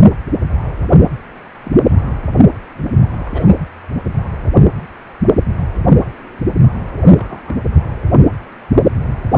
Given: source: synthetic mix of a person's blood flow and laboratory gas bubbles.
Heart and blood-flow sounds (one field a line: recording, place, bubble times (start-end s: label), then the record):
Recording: Doppler ultrasound of blood flow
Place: precordium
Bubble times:
1.64-1.83 s: bubbles
3.24-3.54 s: bubbles
7.16-7.59 s: bubbles
9.30-9.38 s: bubbles
From the record:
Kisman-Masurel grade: 121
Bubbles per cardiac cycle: 1 to 2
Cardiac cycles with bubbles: 10 to 50%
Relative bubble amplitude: barely perceptible (0.100 to 0.250)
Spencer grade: 2 (many but less than half of the cardiac periods contain bubble signals, singularly or in groups)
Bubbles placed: anywhere in the cardiac cycle